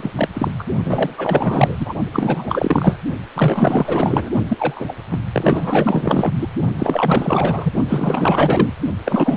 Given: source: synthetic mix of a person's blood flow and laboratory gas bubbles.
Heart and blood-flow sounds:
Doppler ultrasound of blood flow; precordium
0.00-0.11 s: bubbles
0.16-0.29 s: bubbles
0.34-0.51 s: bubbles
0.58-0.64 s: bubbles
0.84-1.76 s: bubbles
1.79-1.95 s: bubbles
2.12-2.97 s: bubbles
3.35-4.30 s: bubbles
4.47-4.92 s: bubbles
5.10-5.18 s: bubbles
5.33-6.33 s: bubbles
6.40-6.47 s: bubbles
6.78-7.72 s: bubbles
7.88-8.74 s: bubbles
9.05-9.37 s: bubbles
From the record:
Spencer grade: 4 (maximum detectable bubble signal sounding continuously throughout systole and diastole of every cardiac period, and overriding the amplitude of the normal cardiac signals); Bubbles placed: only in the low amplitude regions of the cardiac cycle

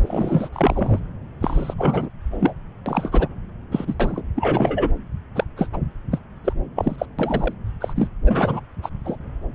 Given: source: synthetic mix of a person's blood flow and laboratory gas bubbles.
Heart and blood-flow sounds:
Doppler ultrasound of blood flow; subclavian vein
0.02-0.49 s: bubbles
0.53-0.99 s: bubbles
1.40-1.74 s: bubbles
1.78-2.09 s: bubbles
2.31-2.54 s: bubbles
2.86-3.27 s: bubbles
3.71-3.95 s: bubbles
4.00-4.22 s: bubbles
4.35-4.91 s: bubbles
5.35-5.44 s: bubbles
5.57-5.68 s: bubbles
5.73-5.78 s: bubbles
6.11-6.19 s: bubbles
6.44-6.53 s: bubbles
6.76-7.06 s: bubbles
7.19-7.54 s: bubbles
7.81-7.93 s: bubbles
7.96-8.07 s: bubbles
8.25-8.60 s: bubbles
8.82-8.89 s: bubbles
9.05-9.16 s: bubbles
From the record:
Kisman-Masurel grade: 332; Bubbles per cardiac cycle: rolling drumbeat, 9 or more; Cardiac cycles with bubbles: 50 to 99%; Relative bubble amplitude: moderate (0.250 to 0.450); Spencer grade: 3 (all of the cardiac periods contain showers or single bubble signals, but not dominating or overriding the cardiac motion signals); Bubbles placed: anywhere in the cardiac cycle

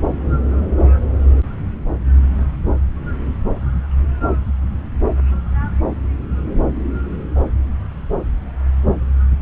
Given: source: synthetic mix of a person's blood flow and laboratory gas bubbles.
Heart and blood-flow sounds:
Doppler ultrasound of blood flow; subclavian vein
no bubbles
From the record:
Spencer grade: 0 (complete lack of bubble signals)

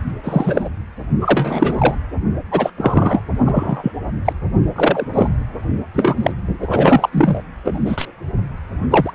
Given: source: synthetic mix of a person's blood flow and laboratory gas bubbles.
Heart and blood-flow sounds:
Doppler ultrasound of blood flow; precordium
0.23-0.69 s: bubbles
1.21-1.95 s: bubbles
2.51-2.70 s: bubbles
2.78-3.21 s: bubbles
3.45-3.92 s: bubbles
4.25-4.33 s: bubbles
4.75-5.06 s: bubbles
5.14-5.28 s: bubbles
5.93-6.33 s: bubbles
6.62-7.09 s: bubbles
7.12-7.41 s: bubbles
7.66-8.05 s: bubbles
8.90-9.11 s: bubbles
From the record:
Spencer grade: 3 (all of the cardiac periods contain showers or single bubble signals, but not dominating or overriding the cardiac motion signals); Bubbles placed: anywhere in the cardiac cycle

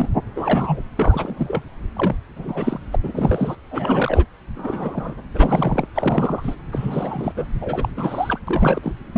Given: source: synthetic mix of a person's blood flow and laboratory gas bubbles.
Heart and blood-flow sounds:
Doppler ultrasound of blood flow; subclavian vein
0.00-0.08 s: bubbles
0.35-0.82 s: bubbles
0.98-1.62 s: bubbles
1.95-2.16 s: bubbles
2.36-2.79 s: bubbles
2.91-2.96 s: bubbles
3.03-3.55 s: bubbles
3.71-4.25 s: bubbles
4.56-5.15 s: bubbles
5.34-5.86 s: bubbles
5.95-6.56 s: bubbles
6.72-7.33 s: bubbles
7.36-7.45 s: bubbles
7.61-7.89 s: bubbles
7.97-8.38 s: bubbles
8.47-8.92 s: bubbles
9.12-9.18 s: bubbles
From the record:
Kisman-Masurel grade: 342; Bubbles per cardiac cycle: rolling drumbeat, 9 or more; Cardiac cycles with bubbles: 100%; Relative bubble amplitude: moderate (0.250 to 0.450); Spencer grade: 3 (all of the cardiac periods contain showers or single bubble signals, but not dominating or overriding the cardiac motion signals); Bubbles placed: anywhere in the cardiac cycle

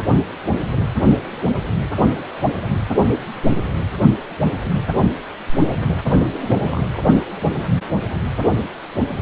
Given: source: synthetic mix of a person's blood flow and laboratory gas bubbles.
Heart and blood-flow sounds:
Doppler ultrasound of blood flow; precordium
6.42-6.83 s: bubbles
From the record:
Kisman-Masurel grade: 211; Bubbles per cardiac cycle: several, 3 to 8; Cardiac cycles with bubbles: 1 to 10%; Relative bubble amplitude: barely perceptible (0.100 to 0.250); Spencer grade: 1 (occasional bubble signal discernible with the cardiac motion signal, with majority of cardiac periods free of bubbles); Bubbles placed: only in the low amplitude regions of the cardiac cycle

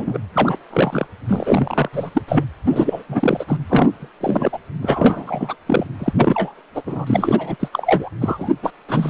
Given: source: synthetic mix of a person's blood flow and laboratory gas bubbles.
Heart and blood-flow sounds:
Doppler ultrasound of blood flow; precordium
0.00-0.18 s: bubbles
0.34-0.58 s: bubbles
0.70-1.07 s: bubbles
1.28-1.89 s: bubbles
1.93-2.10 s: bubbles
2.14-2.21 s: bubbles
2.28-2.44 s: bubbles
2.67-3.02 s: bubbles
3.08-3.44 s: bubbles
3.47-3.57 s: bubbles
3.67-4.09 s: bubbles
4.20-4.58 s: bubbles
4.82-5.56 s: bubbles
5.66-5.87 s: bubbles
5.99-6.13 s: bubbles
6.17-6.54 s: bubbles
6.75-6.83 s: bubbles
6.86-7.57 s: bubbles
7.59-7.69 s: bubbles
7.72-8.09 s: bubbles
8.20-8.51 s: bubbles
8.62-8.71 s: bubbles
8.88-9.10 s: bubbles
From the record:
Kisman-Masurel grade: 343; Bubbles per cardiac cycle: rolling drumbeat, 9 or more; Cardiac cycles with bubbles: 100%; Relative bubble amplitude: loud (0.450 to 0.775); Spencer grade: 3 (all of the cardiac periods contain showers or single bubble signals, but not dominating or overriding the cardiac motion signals); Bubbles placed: anywhere in the cardiac cycle

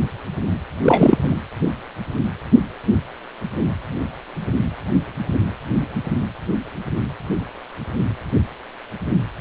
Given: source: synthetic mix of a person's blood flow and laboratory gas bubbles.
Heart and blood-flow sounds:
Doppler ultrasound of blood flow; precordium
0.83-1.18 s: bubbles
1.24-1.34 s: bubbles
From the record:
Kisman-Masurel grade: 223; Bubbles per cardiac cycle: several, 3 to 8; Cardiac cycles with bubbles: 10 to 50%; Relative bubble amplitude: loud (0.450 to 0.775); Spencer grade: 2 (many but less than half of the cardiac periods contain bubble signals, singularly or in groups); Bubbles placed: anywhere in the cardiac cycle

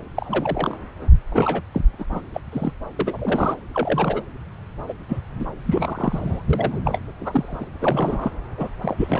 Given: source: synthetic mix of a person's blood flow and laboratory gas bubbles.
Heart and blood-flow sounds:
Doppler ultrasound of blood flow; subclavian vein
0.15-0.77 s: bubbles
1.31-1.62 s: bubbles
1.72-1.81 s: bubbles
1.99-2.05 s: bubbles
2.10-2.21 s: bubbles
2.34-2.41 s: bubbles
2.52-2.73 s: bubbles
2.99-3.56 s: bubbles
3.73-4.21 s: bubbles
4.88-4.93 s: bubbles
5.08-5.21 s: bubbles
5.39-5.47 s: bubbles
5.67-6.42 s: bubbles
6.50-6.80 s: bubbles
6.84-6.99 s: bubbles
7.20-7.67 s: bubbles
7.79-8.31 s: bubbles
8.58-8.72 s: bubbles
8.82-9.20 s: bubbles
From the record:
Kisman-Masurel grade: 242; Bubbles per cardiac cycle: several, 3 to 8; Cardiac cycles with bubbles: 100%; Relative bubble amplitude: moderate (0.250 to 0.450); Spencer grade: 3 (all of the cardiac periods contain showers or single bubble signals, but not dominating or overriding the cardiac motion signals); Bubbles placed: anywhere in the cardiac cycle

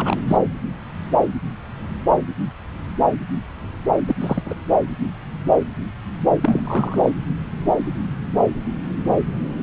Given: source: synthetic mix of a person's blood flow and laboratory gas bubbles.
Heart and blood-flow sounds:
Doppler ultrasound of blood flow; subclavian vein
0.00-0.21 s: bubbles
0.28-0.36 s: bubbles
4.07-4.15 s: bubbles
4.21-4.54 s: bubbles
6.42-7.11 s: bubbles
From the record:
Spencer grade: 2 (many but less than half of the cardiac periods contain bubble signals, singularly or in groups); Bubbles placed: anywhere in the cardiac cycle

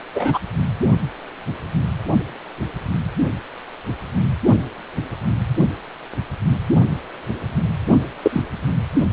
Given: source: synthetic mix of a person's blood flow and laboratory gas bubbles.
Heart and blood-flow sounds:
Doppler ultrasound of blood flow; precordium
0.14-0.38 s: bubbles
8.23-8.43 s: bubbles
From the record:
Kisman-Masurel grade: 123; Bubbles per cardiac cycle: 1 to 2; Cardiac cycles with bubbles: 10 to 50%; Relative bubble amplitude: loud (0.450 to 0.775); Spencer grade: 2 (many but less than half of the cardiac periods contain bubble signals, singularly or in groups); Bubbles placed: only in the low amplitude regions of the cardiac cycle

